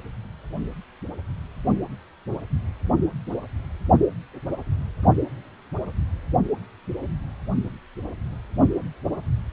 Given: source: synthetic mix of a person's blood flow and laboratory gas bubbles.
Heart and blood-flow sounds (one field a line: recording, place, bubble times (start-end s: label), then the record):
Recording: Doppler ultrasound of blood flow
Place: precordium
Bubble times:
no bubbles
From the record:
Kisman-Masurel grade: 000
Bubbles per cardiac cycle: 0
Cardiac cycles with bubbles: 0%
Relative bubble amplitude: no bubbles discernible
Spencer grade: 0 (complete lack of bubble signals)